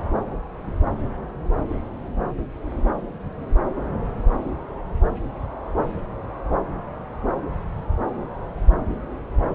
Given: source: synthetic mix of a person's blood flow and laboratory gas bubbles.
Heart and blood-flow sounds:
Doppler ultrasound of blood flow; subclavian vein
no bubbles
From the record:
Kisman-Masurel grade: 000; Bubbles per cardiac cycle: 0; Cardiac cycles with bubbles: 0%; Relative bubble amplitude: no bubbles discernible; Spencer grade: 0 (complete lack of bubble signals)

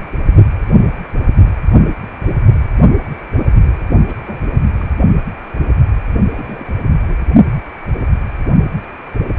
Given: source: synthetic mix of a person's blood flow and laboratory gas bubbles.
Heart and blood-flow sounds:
Doppler ultrasound of blood flow; precordium
3.34-3.49 s: bubbles
3.55-3.83 s: bubbles
4.08-4.18 s: bubbles
4.21-4.39 s: bubbles
4.79-4.91 s: bubbles
6.33-6.77 s: bubbles
7.03-7.14 s: bubbles
From the record:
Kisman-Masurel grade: 221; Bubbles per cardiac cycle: several, 3 to 8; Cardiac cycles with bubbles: 10 to 50%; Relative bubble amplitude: barely perceptible (0.100 to 0.250); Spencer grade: 2 (many but less than half of the cardiac periods contain bubble signals, singularly or in groups); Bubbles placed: only in the low amplitude regions of the cardiac cycle

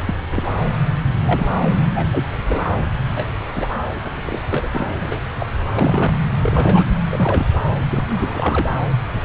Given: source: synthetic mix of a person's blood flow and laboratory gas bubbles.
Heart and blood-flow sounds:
Doppler ultrasound of blood flow; subclavian vein
0.04-0.28 s: bubbles
0.33-0.52 s: bubbles
1.22-1.47 s: bubbles
1.60-1.70 s: bubbles
1.95-2.07 s: bubbles
2.12-2.25 s: bubbles
2.44-2.77 s: bubbles
3.15-3.25 s: bubbles
3.52-3.67 s: bubbles
4.24-4.40 s: bubbles
4.51-4.69 s: bubbles
4.72-4.95 s: bubbles
5.01-5.22 s: bubbles
5.39-5.46 s: bubbles
5.72-6.10 s: bubbles
6.41-6.85 s: bubbles
7.10-7.46 s: bubbles
7.91-8.04 s: bubbles
8.08-8.74 s: bubbles
9.13-9.21 s: bubbles
From the record:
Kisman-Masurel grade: 242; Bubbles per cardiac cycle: several, 3 to 8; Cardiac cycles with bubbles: 100%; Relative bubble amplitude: moderate (0.250 to 0.450); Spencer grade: 3 (all of the cardiac periods contain showers or single bubble signals, but not dominating or overriding the cardiac motion signals); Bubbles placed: anywhere in the cardiac cycle

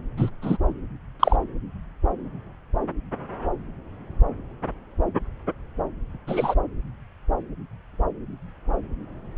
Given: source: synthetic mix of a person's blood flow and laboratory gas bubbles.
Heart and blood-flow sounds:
Doppler ultrasound of blood flow; subclavian vein
0.17-0.30 s: bubbles
0.42-0.57 s: bubbles
1.20-1.36 s: bubbles
6.27-6.54 s: bubbles
From the record:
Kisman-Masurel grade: 123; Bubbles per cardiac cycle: 1 to 2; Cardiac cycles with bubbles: 10 to 50%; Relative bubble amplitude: loud (0.450 to 0.775); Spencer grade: 2 (many but less than half of the cardiac periods contain bubble signals, singularly or in groups); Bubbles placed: anywhere in the cardiac cycle

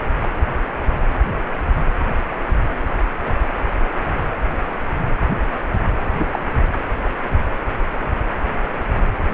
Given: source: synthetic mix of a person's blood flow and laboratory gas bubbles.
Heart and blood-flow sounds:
Doppler ultrasound of blood flow; precordium
6.19-6.25 s: bubbles
6.32-6.40 s: bubbles
From the record:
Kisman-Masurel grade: 112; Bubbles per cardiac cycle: 1 to 2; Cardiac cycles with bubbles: 1 to 10%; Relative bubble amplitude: moderate (0.250 to 0.450); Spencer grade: 1 (occasional bubble signal discernible with the cardiac motion signal, with majority of cardiac periods free of bubbles); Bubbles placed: anywhere in the cardiac cycle

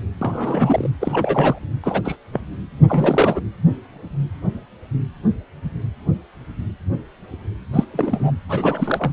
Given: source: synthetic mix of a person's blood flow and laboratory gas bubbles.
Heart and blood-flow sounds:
Doppler ultrasound of blood flow; precordium
0.21-0.91 s: bubbles
1.01-1.58 s: bubbles
1.83-2.02 s: bubbles
2.04-2.16 s: bubbles
2.32-2.41 s: bubbles
2.88-3.41 s: bubbles
7.73-7.85 s: bubbles
7.94-8.31 s: bubbles
8.48-9.12 s: bubbles
From the record:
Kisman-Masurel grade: 222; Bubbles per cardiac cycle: several, 3 to 8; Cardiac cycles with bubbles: 10 to 50%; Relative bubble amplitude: moderate (0.250 to 0.450); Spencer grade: 2 (many but less than half of the cardiac periods contain bubble signals, singularly or in groups); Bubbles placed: anywhere in the cardiac cycle

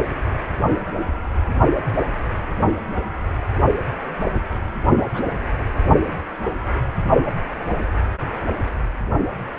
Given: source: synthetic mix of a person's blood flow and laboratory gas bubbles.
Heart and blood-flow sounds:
Doppler ultrasound of blood flow; precordium
5.14-5.24 s: bubbles
5.57-5.61 s: bubbles
From the record:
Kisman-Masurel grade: 111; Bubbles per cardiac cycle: 1 to 2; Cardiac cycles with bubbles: 1 to 10%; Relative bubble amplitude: barely perceptible (0.100 to 0.250); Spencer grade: 1 (occasional bubble signal discernible with the cardiac motion signal, with majority of cardiac periods free of bubbles); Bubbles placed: only in the low amplitude regions of the cardiac cycle

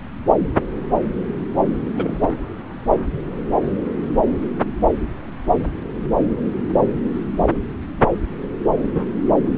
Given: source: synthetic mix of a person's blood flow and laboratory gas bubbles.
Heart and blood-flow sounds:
Doppler ultrasound of blood flow; subclavian vein
1.80-2.37 s: bubbles
From the record:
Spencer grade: 1 (occasional bubble signal discernible with the cardiac motion signal, with majority of cardiac periods free of bubbles); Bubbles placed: anywhere in the cardiac cycle

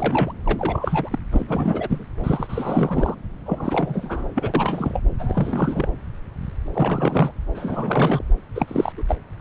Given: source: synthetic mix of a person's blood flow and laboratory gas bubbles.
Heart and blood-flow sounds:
Doppler ultrasound of blood flow; subclavian vein
0.00-0.33 s: bubbles
0.45-1.18 s: bubbles
1.31-1.45 s: bubbles
1.48-2.04 s: bubbles
2.24-3.15 s: bubbles
3.46-4.29 s: bubbles
4.35-5.00 s: bubbles
5.19-5.88 s: bubbles
6.73-7.31 s: bubbles
7.54-8.24 s: bubbles
8.55-8.92 s: bubbles
8.97-9.02 s: bubbles
9.08-9.15 s: bubbles
From the record:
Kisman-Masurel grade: 332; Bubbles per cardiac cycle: rolling drumbeat, 9 or more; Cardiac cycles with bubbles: 50 to 99%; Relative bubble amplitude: moderate (0.250 to 0.450); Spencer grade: 3 (all of the cardiac periods contain showers or single bubble signals, but not dominating or overriding the cardiac motion signals); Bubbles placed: anywhere in the cardiac cycle

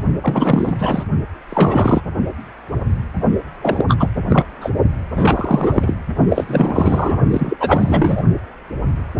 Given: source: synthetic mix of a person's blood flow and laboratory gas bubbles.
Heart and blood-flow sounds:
Doppler ultrasound of blood flow; precordium
0.21-0.73 s: bubbles
0.79-1.04 s: bubbles
1.49-2.01 s: bubbles
3.62-3.84 s: bubbles
3.89-4.09 s: bubbles
4.30-4.44 s: bubbles
4.60-4.71 s: bubbles
5.15-5.97 s: bubbles
6.28-7.21 s: bubbles
7.30-7.57 s: bubbles
7.59-8.23 s: bubbles
From the record:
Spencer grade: 3 (all of the cardiac periods contain showers or single bubble signals, but not dominating or overriding the cardiac motion signals); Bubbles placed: only in the low amplitude regions of the cardiac cycle

